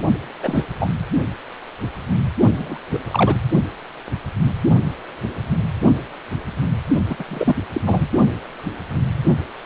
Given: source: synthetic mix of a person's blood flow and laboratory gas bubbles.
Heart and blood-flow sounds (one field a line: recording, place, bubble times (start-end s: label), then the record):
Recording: Doppler ultrasound of blood flow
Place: precordium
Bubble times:
0.43-0.66 s: bubbles
0.79-0.90 s: bubbles
2.57-2.78 s: bubbles
2.93-2.99 s: bubbles
3.11-3.38 s: bubbles
7.08-7.25 s: bubbles
7.28-7.56 s: bubbles
7.73-7.81 s: bubbles
7.85-8.08 s: bubbles
From the record:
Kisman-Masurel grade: 232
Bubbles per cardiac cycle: several, 3 to 8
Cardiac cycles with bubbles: 50 to 99%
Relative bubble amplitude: moderate (0.250 to 0.450)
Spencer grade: 3 (all of the cardiac periods contain showers or single bubble signals, but not dominating or overriding the cardiac motion signals)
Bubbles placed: only in the low amplitude regions of the cardiac cycle